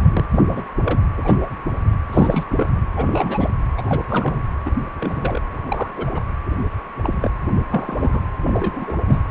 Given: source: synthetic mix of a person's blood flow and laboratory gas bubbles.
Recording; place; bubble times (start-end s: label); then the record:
Doppler ultrasound of blood flow; precordium
0.00-0.26 s: bubbles
0.32-0.41 s: bubbles
0.48-0.67 s: bubbles
0.84-1.00 s: bubbles
1.17-1.38 s: bubbles
1.42-1.50 s: bubbles
2.12-2.46 s: bubbles
2.50-2.69 s: bubbles
2.96-3.50 s: bubbles
3.77-3.82 s: bubbles
3.86-4.02 s: bubbles
4.09-4.41 s: bubbles
4.65-4.70 s: bubbles
4.98-5.41 s: bubbles
5.54-5.94 s: bubbles
5.96-6.21 s: bubbles
6.46-6.50 s: bubbles
7.03-7.30 s: bubbles
7.71-8.21 s: bubbles
8.46-8.93 s: bubbles
9.08-9.20 s: bubbles
From the record:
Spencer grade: 3 (all of the cardiac periods contain showers or single bubble signals, but not dominating or overriding the cardiac motion signals); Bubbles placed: anywhere in the cardiac cycle